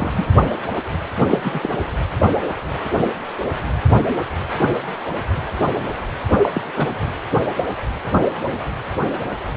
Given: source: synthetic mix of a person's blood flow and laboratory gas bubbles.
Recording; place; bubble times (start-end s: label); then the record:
Doppler ultrasound of blood flow; precordium
0.00-0.14 s: bubbles
0.17-0.26 s: bubbles
1.31-1.41 s: bubbles
1.44-1.69 s: bubbles
6.42-6.49 s: bubbles
6.54-6.62 s: bubbles
6.76-6.97 s: bubbles
From the record:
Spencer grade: 2 (many but less than half of the cardiac periods contain bubble signals, singularly or in groups); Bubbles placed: anywhere in the cardiac cycle